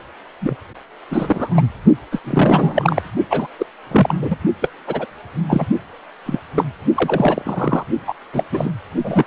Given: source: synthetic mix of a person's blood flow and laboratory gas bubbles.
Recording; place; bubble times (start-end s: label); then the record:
Doppler ultrasound of blood flow; precordium
0.41-0.55 s: bubbles
1.08-1.63 s: bubbles
2.12-2.19 s: bubbles
2.24-3.00 s: bubbles
3.29-3.47 s: bubbles
3.58-3.66 s: bubbles
3.91-4.15 s: bubbles
4.21-4.36 s: bubbles
4.62-4.69 s: bubbles
4.87-5.06 s: bubbles
5.49-5.67 s: bubbles
6.25-6.40 s: bubbles
6.56-6.65 s: bubbles
6.96-7.84 s: bubbles
8.07-8.14 s: bubbles
8.33-8.44 s: bubbles
8.52-8.71 s: bubbles
9.04-9.27 s: bubbles
From the record:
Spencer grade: 3 (all of the cardiac periods contain showers or single bubble signals, but not dominating or overriding the cardiac motion signals); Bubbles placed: only in the low amplitude regions of the cardiac cycle